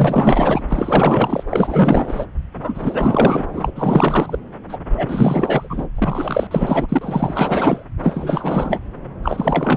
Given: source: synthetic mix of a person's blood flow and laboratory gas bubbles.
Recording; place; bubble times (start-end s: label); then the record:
Doppler ultrasound of blood flow; subclavian vein
0.00-0.64 s: bubbles
0.68-1.44 s: bubbles
1.50-2.26 s: bubbles
2.53-3.45 s: bubbles
3.53-3.71 s: bubbles
3.75-4.39 s: bubbles
4.69-4.78 s: bubbles
4.97-5.88 s: bubbles
5.95-6.47 s: bubbles
6.50-7.83 s: bubbles
8.02-8.80 s: bubbles
9.23-9.77 s: bubbles
From the record:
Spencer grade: 4 (maximum detectable bubble signal sounding continuously throughout systole and diastole of every cardiac period, and overriding the amplitude of the normal cardiac signals); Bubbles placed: anywhere in the cardiac cycle